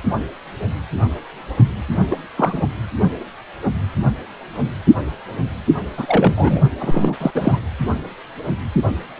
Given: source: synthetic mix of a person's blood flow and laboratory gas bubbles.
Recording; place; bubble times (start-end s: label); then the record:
Doppler ultrasound of blood flow; precordium
2.10-2.16 s: bubbles
2.37-2.61 s: bubbles
5.97-6.62 s: bubbles
6.79-7.16 s: bubbles
7.20-7.31 s: bubbles
7.33-7.59 s: bubbles
From the record:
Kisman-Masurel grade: 223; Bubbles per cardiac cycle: several, 3 to 8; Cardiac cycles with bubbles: 10 to 50%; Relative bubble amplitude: loud (0.450 to 0.775); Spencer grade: 2 (many but less than half of the cardiac periods contain bubble signals, singularly or in groups); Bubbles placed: anywhere in the cardiac cycle